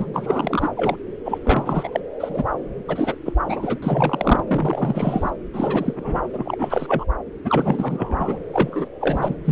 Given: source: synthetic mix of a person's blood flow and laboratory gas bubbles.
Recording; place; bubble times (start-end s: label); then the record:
Doppler ultrasound of blood flow; subclavian vein
0.00-0.07 s: bubbles
0.13-0.70 s: bubbles
0.77-0.96 s: bubbles
1.25-1.38 s: bubbles
1.43-2.00 s: bubbles
2.20-2.44 s: bubbles
2.88-3.16 s: bubbles
3.25-3.33 s: bubbles
3.48-3.79 s: bubbles
3.82-4.43 s: bubbles
4.47-5.30 s: bubbles
5.53-6.21 s: bubbles
6.33-7.04 s: bubbles
7.45-8.38 s: bubbles
8.53-8.88 s: bubbles
9.00-9.35 s: bubbles
9.44-9.52 s: bubbles
From the record:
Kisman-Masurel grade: 343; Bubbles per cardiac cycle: rolling drumbeat, 9 or more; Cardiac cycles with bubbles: 100%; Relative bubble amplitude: loud (0.450 to 0.775); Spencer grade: 3 (all of the cardiac periods contain showers or single bubble signals, but not dominating or overriding the cardiac motion signals); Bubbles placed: anywhere in the cardiac cycle